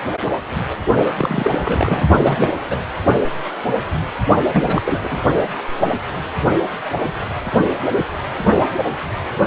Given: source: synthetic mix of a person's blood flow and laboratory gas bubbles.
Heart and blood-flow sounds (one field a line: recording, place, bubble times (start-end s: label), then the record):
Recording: Doppler ultrasound of blood flow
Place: precordium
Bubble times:
1.18-2.05 s: bubbles
2.22-2.53 s: bubbles
2.69-2.77 s: bubbles
4.51-4.81 s: bubbles
4.84-5.19 s: bubbles
From the record:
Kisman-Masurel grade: 222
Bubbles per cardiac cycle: several, 3 to 8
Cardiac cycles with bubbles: 10 to 50%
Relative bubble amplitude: moderate (0.250 to 0.450)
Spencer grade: 2 (many but less than half of the cardiac periods contain bubble signals, singularly or in groups)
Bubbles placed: only in the low amplitude regions of the cardiac cycle